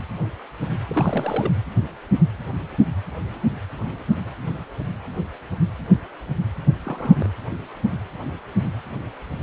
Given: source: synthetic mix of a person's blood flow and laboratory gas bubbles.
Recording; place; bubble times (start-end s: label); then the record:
Doppler ultrasound of blood flow; precordium
0.89-1.51 s: bubbles
6.85-7.31 s: bubbles
From the record:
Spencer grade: 2 (many but less than half of the cardiac periods contain bubble signals, singularly or in groups); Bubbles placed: anywhere in the cardiac cycle